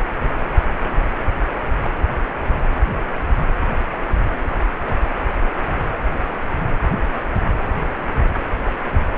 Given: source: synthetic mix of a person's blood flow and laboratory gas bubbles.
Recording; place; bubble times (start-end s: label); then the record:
Doppler ultrasound of blood flow; precordium
no bubbles
From the record:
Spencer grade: 0 (complete lack of bubble signals)